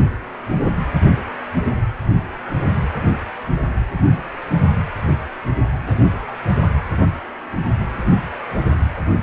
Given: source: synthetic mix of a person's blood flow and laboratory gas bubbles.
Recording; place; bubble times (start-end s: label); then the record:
Doppler ultrasound of blood flow; precordium
5.85-5.96 s: bubbles
From the record:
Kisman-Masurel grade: 111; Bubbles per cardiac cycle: 1 to 2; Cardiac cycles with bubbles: 1 to 10%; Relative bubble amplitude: barely perceptible (0.100 to 0.250); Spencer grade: 1 (occasional bubble signal discernible with the cardiac motion signal, with majority of cardiac periods free of bubbles); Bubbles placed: only in the low amplitude regions of the cardiac cycle